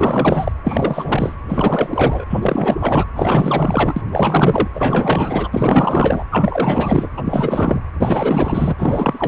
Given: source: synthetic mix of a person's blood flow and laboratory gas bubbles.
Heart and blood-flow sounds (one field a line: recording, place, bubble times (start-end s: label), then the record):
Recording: Doppler ultrasound of blood flow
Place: precordium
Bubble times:
0.00-0.52 s: bubbles
0.64-1.35 s: bubbles
1.48-2.25 s: bubbles
2.29-2.76 s: bubbles
2.79-3.05 s: bubbles
3.15-4.02 s: bubbles
4.12-4.68 s: bubbles
4.75-5.49 s: bubbles
5.52-6.24 s: bubbles
6.31-7.08 s: bubbles
7.17-7.22 s: bubbles
7.25-7.80 s: bubbles
7.99-9.28 s: bubbles
From the record:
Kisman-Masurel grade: 444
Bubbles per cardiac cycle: continuous sound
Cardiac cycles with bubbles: 100%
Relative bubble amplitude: maximal (0.775 to 0.999)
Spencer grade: 4 (maximum detectable bubble signal sounding continuously throughout systole and diastole of every cardiac period, and overriding the amplitude of the normal cardiac signals)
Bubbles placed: anywhere in the cardiac cycle